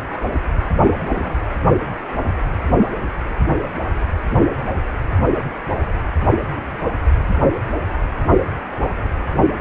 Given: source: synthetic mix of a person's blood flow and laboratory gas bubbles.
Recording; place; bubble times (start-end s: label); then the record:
Doppler ultrasound of blood flow; precordium
0.84-1.39 s: bubbles
From the record:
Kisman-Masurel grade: 221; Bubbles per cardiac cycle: several, 3 to 8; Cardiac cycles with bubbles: 10 to 50%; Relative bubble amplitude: barely perceptible (0.100 to 0.250); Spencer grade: 2 (many but less than half of the cardiac periods contain bubble signals, singularly or in groups); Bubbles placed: anywhere in the cardiac cycle